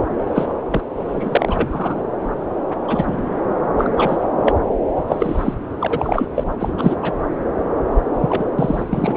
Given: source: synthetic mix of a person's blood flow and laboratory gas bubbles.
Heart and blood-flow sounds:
Doppler ultrasound of blood flow; subclavian vein
0.00-0.05 s: bubbles
0.35-0.46 s: bubbles
0.70-0.81 s: bubbles
1.08-1.96 s: bubbles
2.88-3.29 s: bubbles
3.78-4.20 s: bubbles
4.45-4.53 s: bubbles
5.07-5.54 s: bubbles
5.80-5.87 s: bubbles
5.89-6.27 s: bubbles
6.35-6.43 s: bubbles
6.59-6.72 s: bubbles
6.77-6.96 s: bubbles
7.02-7.13 s: bubbles
8.19-8.45 s: bubbles
8.59-8.84 s: bubbles
8.87-9.17 s: bubbles
From the record:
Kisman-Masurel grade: 233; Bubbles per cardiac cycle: several, 3 to 8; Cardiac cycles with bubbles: 50 to 99%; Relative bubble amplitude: loud (0.450 to 0.775); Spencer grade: 3 (all of the cardiac periods contain showers or single bubble signals, but not dominating or overriding the cardiac motion signals); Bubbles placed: anywhere in the cardiac cycle

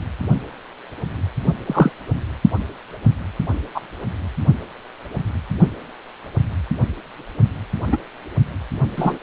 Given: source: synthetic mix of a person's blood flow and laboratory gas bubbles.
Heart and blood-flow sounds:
Doppler ultrasound of blood flow; precordium
1.66-1.92 s: bubbles
3.74-3.81 s: bubbles
7.92-7.98 s: bubbles
8.96-9.19 s: bubbles
From the record:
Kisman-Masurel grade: 123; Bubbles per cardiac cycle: 1 to 2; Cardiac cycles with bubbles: 10 to 50%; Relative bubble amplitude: loud (0.450 to 0.775); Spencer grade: 2 (many but less than half of the cardiac periods contain bubble signals, singularly or in groups); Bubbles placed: only in the low amplitude regions of the cardiac cycle

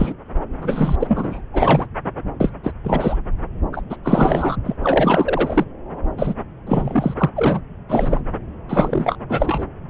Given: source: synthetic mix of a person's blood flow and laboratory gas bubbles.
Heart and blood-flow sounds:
Doppler ultrasound of blood flow; subclavian vein
0.00-0.14 s: bubbles
0.60-0.95 s: bubbles
0.99-1.42 s: bubbles
1.53-1.86 s: bubbles
2.40-2.52 s: bubbles
2.63-2.71 s: bubbles
2.83-3.19 s: bubbles
3.73-3.82 s: bubbles
3.90-3.97 s: bubbles
4.04-4.56 s: bubbles
4.64-4.76 s: bubbles
4.82-5.65 s: bubbles
6.17-6.34 s: bubbles
6.66-7.14 s: bubbles
7.18-7.30 s: bubbles
7.36-7.61 s: bubbles
7.89-8.21 s: bubbles
8.69-9.16 s: bubbles
9.29-9.67 s: bubbles
From the record:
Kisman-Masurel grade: 343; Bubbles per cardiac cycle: rolling drumbeat, 9 or more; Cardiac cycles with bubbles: 100%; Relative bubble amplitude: loud (0.450 to 0.775); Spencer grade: 3 (all of the cardiac periods contain showers or single bubble signals, but not dominating or overriding the cardiac motion signals); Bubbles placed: anywhere in the cardiac cycle

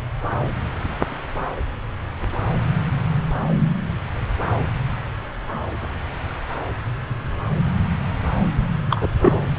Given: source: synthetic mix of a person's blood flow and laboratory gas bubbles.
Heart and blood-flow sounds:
Doppler ultrasound of blood flow; subclavian vein
8.89-9.07 s: bubbles
9.22-9.38 s: bubbles
From the record:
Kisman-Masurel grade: 213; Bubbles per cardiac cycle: several, 3 to 8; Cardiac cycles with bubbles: 1 to 10%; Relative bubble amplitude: loud (0.450 to 0.775); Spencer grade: 1 (occasional bubble signal discernible with the cardiac motion signal, with majority of cardiac periods free of bubbles); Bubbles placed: anywhere in the cardiac cycle

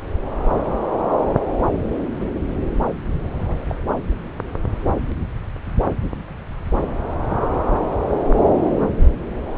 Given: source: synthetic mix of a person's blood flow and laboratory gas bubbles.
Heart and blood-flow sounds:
Doppler ultrasound of blood flow; subclavian vein
2.20-2.27 s: bubbles
3.48-3.60 s: bubbles
3.69-3.75 s: bubbles
7.25-7.38 s: bubbles
8.79-8.86 s: bubbles
From the record:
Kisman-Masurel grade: 121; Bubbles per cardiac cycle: 1 to 2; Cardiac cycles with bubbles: 10 to 50%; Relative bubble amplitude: barely perceptible (0.100 to 0.250); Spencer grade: 2 (many but less than half of the cardiac periods contain bubble signals, singularly or in groups); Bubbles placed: anywhere in the cardiac cycle

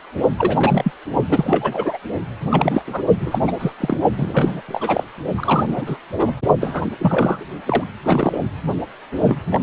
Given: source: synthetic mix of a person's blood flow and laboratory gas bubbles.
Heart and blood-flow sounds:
Doppler ultrasound of blood flow; precordium
0.38-0.92 s: bubbles
1.28-1.98 s: bubbles
2.50-3.02 s: bubbles
3.20-3.39 s: bubbles
3.47-3.52 s: bubbles
3.59-3.73 s: bubbles
3.80-3.98 s: bubbles
4.18-4.62 s: bubbles
4.68-5.04 s: bubbles
5.38-5.98 s: bubbles
6.19-6.36 s: bubbles
6.61-6.87 s: bubbles
6.99-7.45 s: bubbles
7.66-7.84 s: bubbles
8.04-8.43 s: bubbles
9.27-9.39 s: bubbles
9.51-9.59 s: bubbles
From the record:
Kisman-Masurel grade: 243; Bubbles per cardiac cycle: several, 3 to 8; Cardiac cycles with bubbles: 100%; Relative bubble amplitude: loud (0.450 to 0.775); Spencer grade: 3 (all of the cardiac periods contain showers or single bubble signals, but not dominating or overriding the cardiac motion signals); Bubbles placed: only in the low amplitude regions of the cardiac cycle

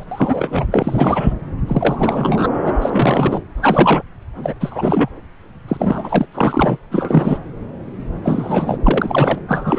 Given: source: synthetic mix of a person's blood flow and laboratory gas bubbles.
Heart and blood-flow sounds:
Doppler ultrasound of blood flow; subclavian vein
0.00-0.03 s: bubbles
0.11-0.65 s: bubbles
0.71-1.33 s: bubbles
1.67-2.49 s: bubbles
2.66-2.74 s: bubbles
2.81-3.41 s: bubbles
3.62-4.02 s: bubbles
4.35-4.54 s: bubbles
4.60-5.09 s: bubbles
5.68-6.26 s: bubbles
6.32-6.78 s: bubbles
6.91-7.38 s: bubbles
8.23-8.78 s: bubbles
8.83-9.38 s: bubbles
9.48-9.79 s: bubbles
From the record:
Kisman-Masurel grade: 333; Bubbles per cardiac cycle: rolling drumbeat, 9 or more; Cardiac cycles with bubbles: 50 to 99%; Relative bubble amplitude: loud (0.450 to 0.775); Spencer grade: 3 (all of the cardiac periods contain showers or single bubble signals, but not dominating or overriding the cardiac motion signals); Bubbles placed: anywhere in the cardiac cycle

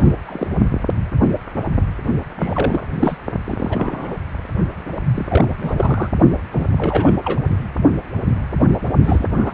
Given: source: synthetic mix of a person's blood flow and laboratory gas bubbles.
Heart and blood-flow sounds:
Doppler ultrasound of blood flow; precordium
0.00-0.11 s: bubbles
0.26-0.48 s: bubbles
2.39-2.83 s: bubbles
2.99-3.17 s: bubbles
3.44-4.17 s: bubbles
5.15-5.25 s: bubbles
5.28-5.48 s: bubbles
5.58-6.09 s: bubbles
6.52-6.68 s: bubbles
6.78-7.19 s: bubbles
7.23-7.39 s: bubbles
9.04-9.26 s: bubbles
9.36-9.54 s: bubbles
From the record:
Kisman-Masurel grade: 332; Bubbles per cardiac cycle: rolling drumbeat, 9 or more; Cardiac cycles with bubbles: 50 to 99%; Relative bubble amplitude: moderate (0.250 to 0.450); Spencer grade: 3 (all of the cardiac periods contain showers or single bubble signals, but not dominating or overriding the cardiac motion signals); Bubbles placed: only in the low amplitude regions of the cardiac cycle

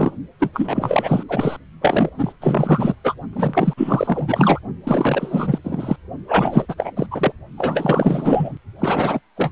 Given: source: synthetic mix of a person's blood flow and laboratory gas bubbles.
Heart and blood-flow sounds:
Doppler ultrasound of blood flow; precordium
0.00-0.11 s: bubbles
0.39-0.49 s: bubbles
0.54-1.24 s: bubbles
1.28-1.56 s: bubbles
1.81-2.09 s: bubbles
2.17-2.33 s: bubbles
2.41-2.96 s: bubbles
3.04-3.15 s: bubbles
3.33-3.74 s: bubbles
3.77-4.60 s: bubbles
4.83-5.59 s: bubbles
5.63-5.96 s: bubbles
6.27-6.75 s: bubbles
6.78-6.92 s: bubbles
6.96-7.07 s: bubbles
7.11-7.32 s: bubbles
7.58-8.58 s: bubbles
8.79-9.20 s: bubbles
9.37-9.51 s: bubbles
From the record:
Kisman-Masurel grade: 444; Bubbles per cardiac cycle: continuous sound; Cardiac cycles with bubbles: 100%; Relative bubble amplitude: maximal (0.775 to 0.999); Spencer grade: 4 (maximum detectable bubble signal sounding continuously throughout systole and diastole of every cardiac period, and overriding the amplitude of the normal cardiac signals); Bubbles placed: only in the low amplitude regions of the cardiac cycle

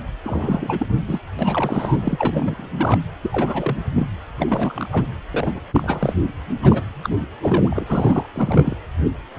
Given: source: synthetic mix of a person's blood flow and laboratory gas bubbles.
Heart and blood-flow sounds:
Doppler ultrasound of blood flow; precordium
0.23-0.86 s: bubbles
1.07-1.20 s: bubbles
1.39-2.71 s: bubbles
2.78-3.00 s: bubbles
3.21-3.77 s: bubbles
3.96-4.07 s: bubbles
4.38-4.89 s: bubbles
4.91-5.08 s: bubbles
5.31-5.52 s: bubbles
5.54-5.61 s: bubbles
5.72-6.14 s: bubbles
6.62-6.83 s: bubbles
7.03-7.17 s: bubbles
7.41-8.26 s: bubbles
8.35-8.77 s: bubbles
From the record:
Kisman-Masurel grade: 332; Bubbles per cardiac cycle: rolling drumbeat, 9 or more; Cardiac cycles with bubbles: 50 to 99%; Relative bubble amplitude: moderate (0.250 to 0.450); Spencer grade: 3 (all of the cardiac periods contain showers or single bubble signals, but not dominating or overriding the cardiac motion signals); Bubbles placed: anywhere in the cardiac cycle

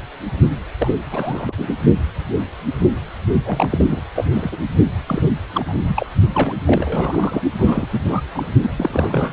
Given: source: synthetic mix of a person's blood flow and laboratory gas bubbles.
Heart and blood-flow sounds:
Doppler ultrasound of blood flow; precordium
0.79-0.95 s: bubbles
1.11-1.53 s: bubbles
1.57-1.74 s: bubbles
3.45-3.69 s: bubbles
3.71-4.01 s: bubbles
4.15-4.25 s: bubbles
4.30-4.58 s: bubbles
5.07-5.29 s: bubbles
5.54-5.66 s: bubbles
5.68-5.73 s: bubbles
5.87-6.06 s: bubbles
6.34-6.53 s: bubbles
6.67-7.42 s: bubbles
7.58-7.88 s: bubbles
7.90-8.21 s: bubbles
8.32-8.48 s: bubbles
8.62-8.74 s: bubbles
8.77-9.32 s: bubbles
From the record:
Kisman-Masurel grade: 332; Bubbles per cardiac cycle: rolling drumbeat, 9 or more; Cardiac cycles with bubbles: 50 to 99%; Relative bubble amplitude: moderate (0.250 to 0.450); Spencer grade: 3 (all of the cardiac periods contain showers or single bubble signals, but not dominating or overriding the cardiac motion signals); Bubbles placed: only in the low amplitude regions of the cardiac cycle

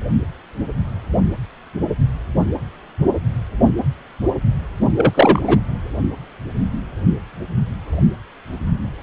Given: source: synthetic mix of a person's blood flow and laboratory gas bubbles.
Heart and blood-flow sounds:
Doppler ultrasound of blood flow; precordium
4.96-5.58 s: bubbles
From the record:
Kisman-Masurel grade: 213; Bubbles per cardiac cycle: several, 3 to 8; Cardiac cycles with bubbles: 1 to 10%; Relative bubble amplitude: loud (0.450 to 0.775); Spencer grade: 1 (occasional bubble signal discernible with the cardiac motion signal, with majority of cardiac periods free of bubbles); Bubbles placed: only in the low amplitude regions of the cardiac cycle

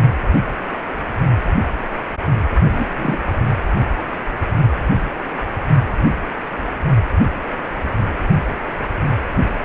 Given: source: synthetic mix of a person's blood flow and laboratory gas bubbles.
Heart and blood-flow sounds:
Doppler ultrasound of blood flow; precordium
2.71-3.19 s: bubbles
From the record:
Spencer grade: 1 (occasional bubble signal discernible with the cardiac motion signal, with majority of cardiac periods free of bubbles); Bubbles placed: only in the low amplitude regions of the cardiac cycle

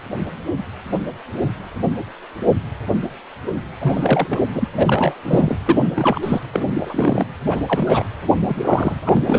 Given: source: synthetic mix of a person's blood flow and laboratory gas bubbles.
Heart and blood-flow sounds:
Doppler ultrasound of blood flow; precordium
3.80-4.40 s: bubbles
4.54-4.68 s: bubbles
4.75-5.21 s: bubbles
5.25-5.58 s: bubbles
5.65-5.91 s: bubbles
5.95-6.19 s: bubbles
6.23-6.41 s: bubbles
6.54-6.71 s: bubbles
6.75-7.25 s: bubbles
7.50-7.61 s: bubbles
7.67-8.07 s: bubbles
8.42-8.99 s: bubbles
9.05-9.39 s: bubbles
From the record:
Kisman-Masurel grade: 332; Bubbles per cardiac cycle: rolling drumbeat, 9 or more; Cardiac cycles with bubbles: 50 to 99%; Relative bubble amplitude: moderate (0.250 to 0.450); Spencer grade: 3 (all of the cardiac periods contain showers or single bubble signals, but not dominating or overriding the cardiac motion signals); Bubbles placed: anywhere in the cardiac cycle

